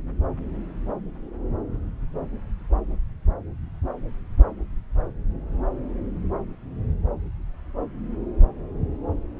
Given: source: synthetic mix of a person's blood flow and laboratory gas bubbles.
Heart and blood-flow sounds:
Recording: Doppler ultrasound of blood flow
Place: subclavian vein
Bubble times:
no bubbles
From the record:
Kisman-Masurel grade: 000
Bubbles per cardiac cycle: 0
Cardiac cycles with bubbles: 0%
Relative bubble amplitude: no bubbles discernible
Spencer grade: 0 (complete lack of bubble signals)

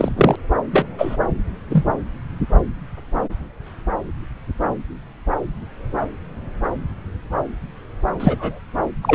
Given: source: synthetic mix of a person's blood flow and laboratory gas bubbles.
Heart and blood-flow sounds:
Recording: Doppler ultrasound of blood flow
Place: subclavian vein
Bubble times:
0.00-0.09 s: bubbles
0.16-0.36 s: bubbles
0.71-0.87 s: bubbles
0.98-1.17 s: bubbles
1.69-1.84 s: bubbles
8.20-8.60 s: bubbles
9.03-9.15 s: bubbles
From the record:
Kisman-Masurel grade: 123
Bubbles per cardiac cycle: 1 to 2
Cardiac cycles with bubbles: 10 to 50%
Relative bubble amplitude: loud (0.450 to 0.775)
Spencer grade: 2 (many but less than half of the cardiac periods contain bubble signals, singularly or in groups)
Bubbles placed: anywhere in the cardiac cycle

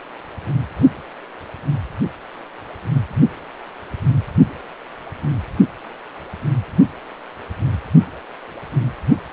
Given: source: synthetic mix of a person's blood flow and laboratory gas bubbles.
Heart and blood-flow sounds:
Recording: Doppler ultrasound of blood flow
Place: precordium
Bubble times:
no bubbles
From the record:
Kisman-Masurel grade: 000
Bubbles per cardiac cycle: 0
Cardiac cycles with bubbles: 0%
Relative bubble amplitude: no bubbles discernible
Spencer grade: 0 (complete lack of bubble signals)

